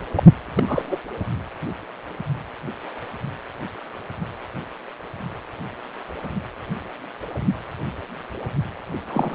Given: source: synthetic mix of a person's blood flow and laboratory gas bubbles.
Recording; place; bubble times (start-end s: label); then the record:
Doppler ultrasound of blood flow; precordium
0.00-0.02 s: bubbles
0.11-0.23 s: bubbles
0.55-0.98 s: bubbles
9.08-9.35 s: bubbles
From the record:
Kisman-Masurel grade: 222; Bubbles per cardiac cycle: several, 3 to 8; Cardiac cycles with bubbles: 10 to 50%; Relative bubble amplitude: moderate (0.250 to 0.450); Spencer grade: 2 (many but less than half of the cardiac periods contain bubble signals, singularly or in groups); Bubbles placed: anywhere in the cardiac cycle